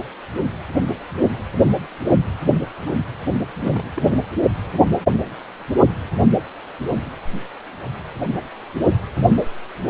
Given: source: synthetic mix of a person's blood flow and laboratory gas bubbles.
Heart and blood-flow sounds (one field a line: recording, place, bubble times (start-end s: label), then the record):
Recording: Doppler ultrasound of blood flow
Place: precordium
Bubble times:
2.86-2.97 s: bubbles
3.59-3.91 s: bubbles
3.96-4.17 s: bubbles
From the record:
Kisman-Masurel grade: 221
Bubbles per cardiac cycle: several, 3 to 8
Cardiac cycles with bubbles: 10 to 50%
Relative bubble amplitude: barely perceptible (0.100 to 0.250)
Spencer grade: 2 (many but less than half of the cardiac periods contain bubble signals, singularly or in groups)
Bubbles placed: anywhere in the cardiac cycle